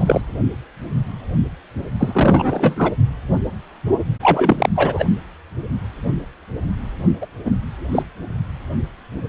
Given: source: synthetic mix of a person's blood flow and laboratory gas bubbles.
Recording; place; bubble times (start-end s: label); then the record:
Doppler ultrasound of blood flow; precordium
0.00-0.21 s: bubbles
1.99-2.92 s: bubbles
4.22-4.70 s: bubbles
4.75-5.04 s: bubbles
7.21-7.27 s: bubbles
7.45-7.53 s: bubbles
7.92-8.02 s: bubbles
From the record:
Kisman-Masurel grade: 223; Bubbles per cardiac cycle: several, 3 to 8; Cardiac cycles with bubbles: 10 to 50%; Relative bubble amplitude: loud (0.450 to 0.775); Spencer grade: 2 (many but less than half of the cardiac periods contain bubble signals, singularly or in groups); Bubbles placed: only in the low amplitude regions of the cardiac cycle